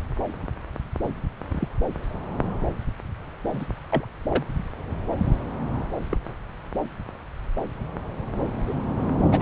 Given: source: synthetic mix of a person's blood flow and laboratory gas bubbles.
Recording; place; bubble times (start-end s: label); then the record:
Doppler ultrasound of blood flow; subclavian vein
1.51-1.68 s: bubbles
3.52-3.66 s: bubbles
3.92-4.05 s: bubbles
4.29-4.45 s: bubbles
6.11-6.17 s: bubbles
8.67-8.73 s: bubbles
9.31-9.42 s: bubbles
From the record:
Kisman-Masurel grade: 121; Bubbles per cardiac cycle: 1 to 2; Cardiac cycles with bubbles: 10 to 50%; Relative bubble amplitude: barely perceptible (0.100 to 0.250); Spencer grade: 2 (many but less than half of the cardiac periods contain bubble signals, singularly or in groups); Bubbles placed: anywhere in the cardiac cycle